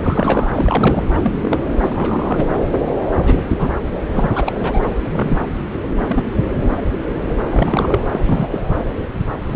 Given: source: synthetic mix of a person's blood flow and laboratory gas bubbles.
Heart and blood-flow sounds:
Doppler ultrasound of blood flow; subclavian vein
0.02-0.48 s: bubbles
0.54-1.03 s: bubbles
1.14-1.19 s: bubbles
1.23-1.32 s: bubbles
1.41-1.58 s: bubbles
1.80-2.46 s: bubbles
3.22-3.44 s: bubbles
3.50-3.69 s: bubbles
4.12-4.52 s: bubbles
4.58-4.80 s: bubbles
5.03-5.44 s: bubbles
6.07-6.24 s: bubbles
6.34-6.39 s: bubbles
7.50-8.00 s: bubbles
8.12-8.49 s: bubbles
8.51-8.60 s: bubbles
9.48-9.56 s: bubbles
From the record:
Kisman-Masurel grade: 232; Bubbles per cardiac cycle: several, 3 to 8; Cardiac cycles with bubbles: 50 to 99%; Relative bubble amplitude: moderate (0.250 to 0.450); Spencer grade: 3 (all of the cardiac periods contain showers or single bubble signals, but not dominating or overriding the cardiac motion signals); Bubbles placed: anywhere in the cardiac cycle

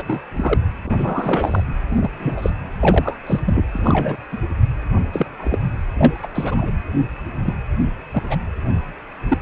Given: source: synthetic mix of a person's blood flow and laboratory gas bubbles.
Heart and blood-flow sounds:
Doppler ultrasound of blood flow; precordium
0.00-0.03 s: bubbles
0.06-0.21 s: bubbles
0.35-0.57 s: bubbles
0.85-1.64 s: bubbles
1.90-2.10 s: bubbles
2.19-2.53 s: bubbles
2.79-3.19 s: bubbles
3.26-3.40 s: bubbles
3.46-3.65 s: bubbles
3.71-4.17 s: bubbles
4.32-4.38 s: bubbles
5.12-5.26 s: bubbles
5.38-5.58 s: bubbles
5.99-6.26 s: bubbles
6.34-6.71 s: bubbles
7.45-7.54 s: bubbles
8.12-8.36 s: bubbles
9.28-9.38 s: bubbles
From the record:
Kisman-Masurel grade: 242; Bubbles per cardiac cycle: several, 3 to 8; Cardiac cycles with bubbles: 100%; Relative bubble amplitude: moderate (0.250 to 0.450); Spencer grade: 3 (all of the cardiac periods contain showers or single bubble signals, but not dominating or overriding the cardiac motion signals); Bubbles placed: anywhere in the cardiac cycle

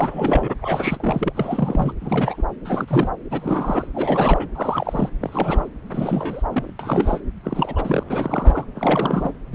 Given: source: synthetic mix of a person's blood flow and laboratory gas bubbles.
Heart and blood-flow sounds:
Doppler ultrasound of blood flow; subclavian vein
0.00-0.54 s: bubbles
0.61-0.97 s: bubbles
1.00-1.32 s: bubbles
1.35-1.93 s: bubbles
2.01-2.43 s: bubbles
2.65-3.10 s: bubbles
3.31-3.87 s: bubbles
3.94-4.48 s: bubbles
4.55-5.09 s: bubbles
5.21-5.69 s: bubbles
5.92-6.42 s: bubbles
6.50-6.73 s: bubbles
6.79-7.21 s: bubbles
7.43-8.03 s: bubbles
8.08-8.65 s: bubbles
8.75-9.30 s: bubbles
9.52-9.55 s: bubbles
From the record:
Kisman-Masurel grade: 342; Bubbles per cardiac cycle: rolling drumbeat, 9 or more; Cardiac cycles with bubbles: 100%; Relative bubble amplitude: moderate (0.250 to 0.450); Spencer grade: 3 (all of the cardiac periods contain showers or single bubble signals, but not dominating or overriding the cardiac motion signals); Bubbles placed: anywhere in the cardiac cycle

